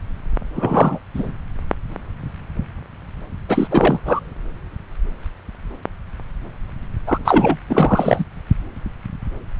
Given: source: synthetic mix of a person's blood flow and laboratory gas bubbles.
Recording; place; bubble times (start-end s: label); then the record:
Doppler ultrasound of blood flow; subclavian vein
0.56-0.98 s: bubbles
1.14-1.34 s: bubbles
3.48-3.67 s: bubbles
3.71-4.00 s: bubbles
4.05-4.20 s: bubbles
7.06-7.18 s: bubbles
7.25-7.58 s: bubbles
7.70-8.24 s: bubbles
From the record:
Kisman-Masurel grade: 223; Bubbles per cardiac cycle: several, 3 to 8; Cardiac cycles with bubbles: 10 to 50%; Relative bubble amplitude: loud (0.450 to 0.775); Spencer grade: 2 (many but less than half of the cardiac periods contain bubble signals, singularly or in groups); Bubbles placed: anywhere in the cardiac cycle